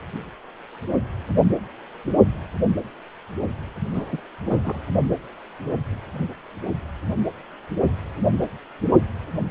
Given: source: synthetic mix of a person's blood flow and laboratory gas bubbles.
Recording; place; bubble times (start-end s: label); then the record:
Doppler ultrasound of blood flow; precordium
3.93-4.21 s: bubbles
4.45-4.80 s: bubbles
From the record:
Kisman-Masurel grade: 212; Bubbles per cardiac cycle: several, 3 to 8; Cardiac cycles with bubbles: 1 to 10%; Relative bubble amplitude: moderate (0.250 to 0.450); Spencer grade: 1 (occasional bubble signal discernible with the cardiac motion signal, with majority of cardiac periods free of bubbles); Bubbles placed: anywhere in the cardiac cycle